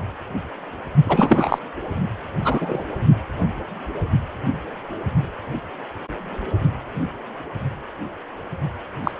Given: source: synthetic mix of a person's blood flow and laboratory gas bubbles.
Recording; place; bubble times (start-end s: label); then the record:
Doppler ultrasound of blood flow; precordium
1.05-1.59 s: bubbles
2.44-2.84 s: bubbles
9.04-9.11 s: bubbles
9.16-9.20 s: bubbles
From the record:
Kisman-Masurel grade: 223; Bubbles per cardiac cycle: several, 3 to 8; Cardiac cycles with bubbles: 10 to 50%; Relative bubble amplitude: loud (0.450 to 0.775); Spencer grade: 2 (many but less than half of the cardiac periods contain bubble signals, singularly or in groups); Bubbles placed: only in the low amplitude regions of the cardiac cycle